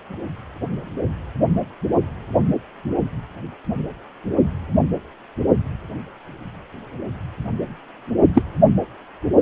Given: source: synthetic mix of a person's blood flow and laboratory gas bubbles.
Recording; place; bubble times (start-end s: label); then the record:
Doppler ultrasound of blood flow; precordium
8.34-8.42 s: bubbles
From the record:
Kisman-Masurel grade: 123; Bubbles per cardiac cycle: 1 to 2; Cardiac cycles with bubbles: 10 to 50%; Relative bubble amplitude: loud (0.450 to 0.775); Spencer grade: 2 (many but less than half of the cardiac periods contain bubble signals, singularly or in groups); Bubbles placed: only in the low amplitude regions of the cardiac cycle